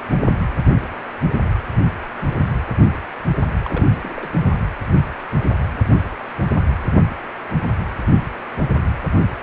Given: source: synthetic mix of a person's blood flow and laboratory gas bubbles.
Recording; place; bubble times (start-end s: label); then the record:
Doppler ultrasound of blood flow; precordium
3.65-3.86 s: bubbles
4.03-4.39 s: bubbles
4.47-4.56 s: bubbles
From the record:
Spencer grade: 2 (many but less than half of the cardiac periods contain bubble signals, singularly or in groups); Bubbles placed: anywhere in the cardiac cycle